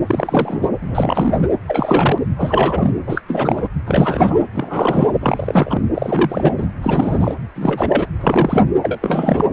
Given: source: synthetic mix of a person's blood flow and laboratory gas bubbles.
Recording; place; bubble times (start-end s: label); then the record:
Doppler ultrasound of blood flow; precordium
0.07-0.69 s: bubbles
0.81-1.48 s: bubbles
1.66-2.21 s: bubbles
2.36-2.93 s: bubbles
3.06-3.21 s: bubbles
3.27-3.69 s: bubbles
3.86-4.41 s: bubbles
4.53-5.13 s: bubbles
5.20-5.80 s: bubbles
5.94-6.67 s: bubbles
6.83-7.34 s: bubbles
7.56-8.07 s: bubbles
8.21-8.63 s: bubbles
8.82-8.98 s: bubbles
9.01-9.46 s: bubbles
From the record:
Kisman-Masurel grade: 343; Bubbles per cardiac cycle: rolling drumbeat, 9 or more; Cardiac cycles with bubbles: 100%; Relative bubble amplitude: loud (0.450 to 0.775); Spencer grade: 3 (all of the cardiac periods contain showers or single bubble signals, but not dominating or overriding the cardiac motion signals); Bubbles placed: anywhere in the cardiac cycle